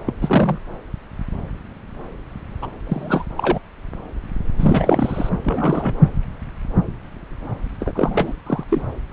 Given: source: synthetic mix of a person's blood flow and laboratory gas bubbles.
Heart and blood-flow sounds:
Doppler ultrasound of blood flow; subclavian vein
0.06-0.14 s: bubbles
0.21-0.58 s: bubbles
2.62-2.67 s: bubbles
2.86-3.25 s: bubbles
3.36-3.58 s: bubbles
4.58-5.29 s: bubbles
5.42-5.98 s: bubbles
7.80-8.32 s: bubbles
8.46-8.63 s: bubbles
8.69-8.81 s: bubbles
From the record:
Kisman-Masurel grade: 222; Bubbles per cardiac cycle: several, 3 to 8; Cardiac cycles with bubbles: 10 to 50%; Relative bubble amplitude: moderate (0.250 to 0.450); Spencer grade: 2 (many but less than half of the cardiac periods contain bubble signals, singularly or in groups); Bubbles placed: anywhere in the cardiac cycle

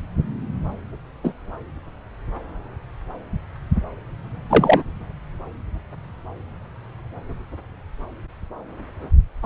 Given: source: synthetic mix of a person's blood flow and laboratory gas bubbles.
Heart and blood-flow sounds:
Doppler ultrasound of blood flow; subclavian vein
1.23-1.34 s: bubbles
4.49-4.83 s: bubbles
9.42-9.45 s: bubbles
From the record:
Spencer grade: 2 (many but less than half of the cardiac periods contain bubble signals, singularly or in groups); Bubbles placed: anywhere in the cardiac cycle

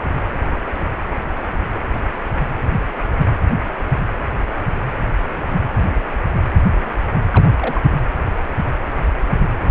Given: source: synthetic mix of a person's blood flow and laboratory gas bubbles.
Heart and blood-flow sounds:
Doppler ultrasound of blood flow; precordium
7.30-7.45 s: bubbles
7.58-7.81 s: bubbles
From the record:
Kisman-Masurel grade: 212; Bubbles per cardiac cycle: several, 3 to 8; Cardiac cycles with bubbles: 1 to 10%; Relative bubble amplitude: moderate (0.250 to 0.450); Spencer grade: 1 (occasional bubble signal discernible with the cardiac motion signal, with majority of cardiac periods free of bubbles); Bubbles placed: anywhere in the cardiac cycle

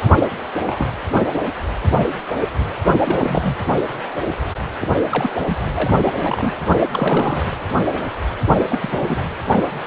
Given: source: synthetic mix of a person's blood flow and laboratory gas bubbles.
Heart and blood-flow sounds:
Doppler ultrasound of blood flow; precordium
0.01-0.12 s: bubbles
0.19-0.23 s: bubbles
0.54-0.59 s: bubbles
0.66-0.93 s: bubbles
3.00-3.55 s: bubbles
4.81-4.87 s: bubbles
5.10-5.30 s: bubbles
5.47-5.58 s: bubbles
5.74-5.92 s: bubbles
6.03-6.12 s: bubbles
6.19-6.53 s: bubbles
6.91-7.45 s: bubbles
8.69-9.22 s: bubbles
From the record:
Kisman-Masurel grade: 222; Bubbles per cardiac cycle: several, 3 to 8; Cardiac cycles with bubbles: 10 to 50%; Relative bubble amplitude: moderate (0.250 to 0.450); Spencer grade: 2 (many but less than half of the cardiac periods contain bubble signals, singularly or in groups); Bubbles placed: anywhere in the cardiac cycle

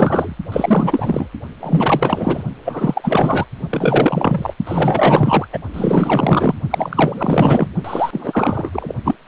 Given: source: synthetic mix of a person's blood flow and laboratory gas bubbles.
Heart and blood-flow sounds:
Doppler ultrasound of blood flow; precordium
0.00-0.37 s: bubbles
0.52-1.29 s: bubbles
1.60-2.43 s: bubbles
2.64-3.45 s: bubbles
3.69-4.54 s: bubbles
4.65-5.48 s: bubbles
5.53-5.58 s: bubbles
5.74-6.54 s: bubbles
6.70-7.68 s: bubbles
7.84-8.94 s: bubbles
9.04-9.15 s: bubbles
From the record:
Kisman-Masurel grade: 444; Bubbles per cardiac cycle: continuous sound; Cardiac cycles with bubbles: 100%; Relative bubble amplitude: maximal (0.775 to 0.999); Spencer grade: 4 (maximum detectable bubble signal sounding continuously throughout systole and diastole of every cardiac period, and overriding the amplitude of the normal cardiac signals); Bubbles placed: only in the low amplitude regions of the cardiac cycle

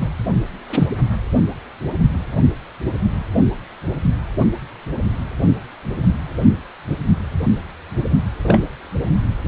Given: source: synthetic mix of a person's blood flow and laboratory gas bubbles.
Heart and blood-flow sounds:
Doppler ultrasound of blood flow; precordium
0.01-0.10 s: bubbles
0.69-0.88 s: bubbles
8.43-8.59 s: bubbles
From the record:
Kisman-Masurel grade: 123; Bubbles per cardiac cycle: 1 to 2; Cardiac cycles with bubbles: 10 to 50%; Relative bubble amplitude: loud (0.450 to 0.775); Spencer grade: 2 (many but less than half of the cardiac periods contain bubble signals, singularly or in groups); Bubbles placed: only in the low amplitude regions of the cardiac cycle

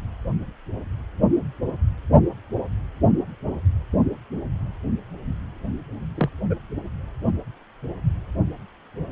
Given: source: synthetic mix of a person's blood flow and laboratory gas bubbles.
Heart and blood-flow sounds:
Doppler ultrasound of blood flow; precordium
6.17-6.29 s: bubbles
6.50-6.55 s: bubbles
From the record:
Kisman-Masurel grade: 112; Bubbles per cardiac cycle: 1 to 2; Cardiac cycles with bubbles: 1 to 10%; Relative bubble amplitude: moderate (0.250 to 0.450); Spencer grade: 1 (occasional bubble signal discernible with the cardiac motion signal, with majority of cardiac periods free of bubbles); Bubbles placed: only in the low amplitude regions of the cardiac cycle

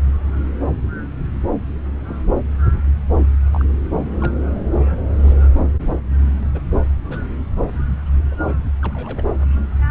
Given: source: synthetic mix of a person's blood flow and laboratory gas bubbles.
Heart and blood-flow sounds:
Doppler ultrasound of blood flow; subclavian vein
2.06-2.16 s: bubbles
3.52-3.64 s: bubbles
3.93-3.99 s: bubbles
4.21-4.32 s: bubbles
4.91-4.97 s: bubbles
5.23-5.33 s: bubbles
6.53-6.61 s: bubbles
7.04-7.25 s: bubbles
8.31-8.35 s: bubbles
8.47-8.54 s: bubbles
8.82-9.28 s: bubbles
From the record:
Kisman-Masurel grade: 121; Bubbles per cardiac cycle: 1 to 2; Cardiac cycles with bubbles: 10 to 50%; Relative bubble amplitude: barely perceptible (0.100 to 0.250); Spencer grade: 2 (many but less than half of the cardiac periods contain bubble signals, singularly or in groups); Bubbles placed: anywhere in the cardiac cycle

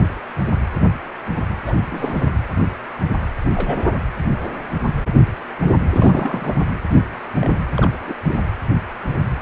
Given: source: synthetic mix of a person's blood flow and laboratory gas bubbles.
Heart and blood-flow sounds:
Doppler ultrasound of blood flow; precordium
1.66-1.76 s: bubbles
1.91-2.29 s: bubbles
3.54-3.94 s: bubbles
5.93-6.57 s: bubbles
6.94-7.01 s: bubbles
7.41-7.61 s: bubbles
7.76-7.91 s: bubbles
8.07-8.14 s: bubbles
8.28-8.41 s: bubbles
9.35-9.42 s: bubbles
From the record:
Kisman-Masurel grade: 232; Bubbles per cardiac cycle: several, 3 to 8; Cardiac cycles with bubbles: 50 to 99%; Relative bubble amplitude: moderate (0.250 to 0.450); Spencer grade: 3 (all of the cardiac periods contain showers or single bubble signals, but not dominating or overriding the cardiac motion signals); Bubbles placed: anywhere in the cardiac cycle

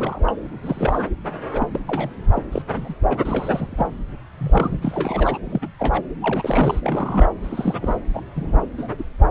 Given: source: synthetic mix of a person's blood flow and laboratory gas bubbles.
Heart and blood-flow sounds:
Doppler ultrasound of blood flow; subclavian vein
0.00-0.33 s: bubbles
0.63-1.09 s: bubbles
1.53-1.67 s: bubbles
1.73-1.80 s: bubbles
1.88-2.10 s: bubbles
2.35-2.42 s: bubbles
2.52-2.62 s: bubbles
2.75-2.95 s: bubbles
3.10-3.17 s: bubbles
3.24-3.88 s: bubbles
4.38-5.38 s: bubbles
5.45-5.67 s: bubbles
5.79-6.03 s: bubbles
6.22-7.30 s: bubbles
7.43-7.95 s: bubbles
8.13-8.22 s: bubbles
8.35-8.61 s: bubbles
8.77-8.88 s: bubbles
8.90-8.96 s: bubbles
8.98-9.03 s: bubbles
From the record:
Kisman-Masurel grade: 242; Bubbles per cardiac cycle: several, 3 to 8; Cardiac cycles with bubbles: 100%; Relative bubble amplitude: moderate (0.250 to 0.450); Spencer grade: 3 (all of the cardiac periods contain showers or single bubble signals, but not dominating or overriding the cardiac motion signals); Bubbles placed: anywhere in the cardiac cycle

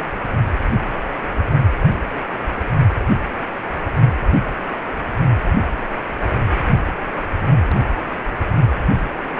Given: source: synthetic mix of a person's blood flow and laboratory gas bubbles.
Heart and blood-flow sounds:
Doppler ultrasound of blood flow; precordium
no bubbles
From the record:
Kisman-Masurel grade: 000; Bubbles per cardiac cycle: 0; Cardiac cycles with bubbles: 0%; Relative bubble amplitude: no bubbles discernible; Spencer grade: 0 (complete lack of bubble signals)

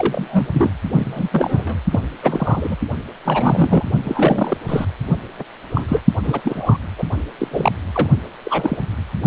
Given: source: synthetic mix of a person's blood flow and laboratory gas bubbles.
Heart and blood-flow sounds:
Doppler ultrasound of blood flow; precordium
0.00-0.47 s: bubbles
0.54-0.70 s: bubbles
0.96-1.28 s: bubbles
1.31-1.79 s: bubbles
1.90-2.00 s: bubbles
2.23-2.75 s: bubbles
3.25-3.83 s: bubbles
4.04-4.55 s: bubbles
4.68-4.85 s: bubbles
5.38-5.43 s: bubbles
5.74-5.84 s: bubbles
5.88-6.01 s: bubbles
6.23-6.41 s: bubbles
6.43-6.77 s: bubbles
6.98-7.04 s: bubbles
7.38-7.48 s: bubbles
7.50-7.72 s: bubbles
7.92-8.07 s: bubbles
8.45-8.78 s: bubbles
From the record:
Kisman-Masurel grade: 242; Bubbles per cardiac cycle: several, 3 to 8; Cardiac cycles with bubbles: 100%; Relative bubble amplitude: moderate (0.250 to 0.450); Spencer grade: 3 (all of the cardiac periods contain showers or single bubble signals, but not dominating or overriding the cardiac motion signals); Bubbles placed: only in the low amplitude regions of the cardiac cycle

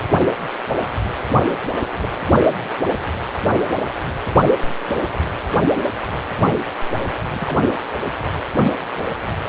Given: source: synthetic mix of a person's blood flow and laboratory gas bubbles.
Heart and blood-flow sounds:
Doppler ultrasound of blood flow; precordium
1.38-1.46 s: bubbles
2.00-2.09 s: bubbles
4.00-4.12 s: bubbles
7.33-7.59 s: bubbles
From the record:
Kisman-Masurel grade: 121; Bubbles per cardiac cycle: 1 to 2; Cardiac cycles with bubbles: 10 to 50%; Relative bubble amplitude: barely perceptible (0.100 to 0.250); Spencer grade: 2 (many but less than half of the cardiac periods contain bubble signals, singularly or in groups); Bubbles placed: anywhere in the cardiac cycle

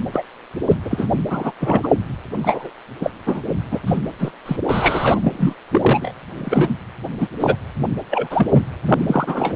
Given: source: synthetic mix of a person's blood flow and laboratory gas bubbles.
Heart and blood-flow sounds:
Doppler ultrasound of blood flow; precordium
0.12-0.23 s: bubbles
0.69-0.75 s: bubbles
0.85-1.08 s: bubbles
1.29-1.52 s: bubbles
1.60-1.88 s: bubbles
2.41-2.70 s: bubbles
3.00-3.10 s: bubbles
3.25-3.41 s: bubbles
3.71-3.81 s: bubbles
3.87-3.99 s: bubbles
4.19-4.32 s: bubbles
4.46-4.57 s: bubbles
4.69-5.20 s: bubbles
5.24-5.53 s: bubbles
5.71-6.12 s: bubbles
6.37-6.75 s: bubbles
7.20-7.28 s: bubbles
7.39-7.56 s: bubbles
8.10-8.47 s: bubbles
8.52-8.64 s: bubbles
8.85-9.05 s: bubbles
9.07-9.56 s: bubbles
From the record:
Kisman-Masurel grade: 243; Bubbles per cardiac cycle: several, 3 to 8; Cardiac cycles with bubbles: 100%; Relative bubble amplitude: loud (0.450 to 0.775); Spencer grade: 3 (all of the cardiac periods contain showers or single bubble signals, but not dominating or overriding the cardiac motion signals); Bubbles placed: anywhere in the cardiac cycle

